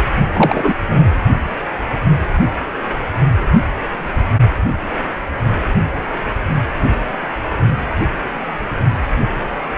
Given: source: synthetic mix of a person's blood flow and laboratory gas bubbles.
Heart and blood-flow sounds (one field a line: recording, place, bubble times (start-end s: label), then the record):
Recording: Doppler ultrasound of blood flow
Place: precordium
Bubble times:
0.33-0.73 s: bubbles
0.89-0.99 s: bubbles
From the record:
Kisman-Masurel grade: 213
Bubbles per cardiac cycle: several, 3 to 8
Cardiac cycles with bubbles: 1 to 10%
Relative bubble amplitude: loud (0.450 to 0.775)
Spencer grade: 1 (occasional bubble signal discernible with the cardiac motion signal, with majority of cardiac periods free of bubbles)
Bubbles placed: only in the low amplitude regions of the cardiac cycle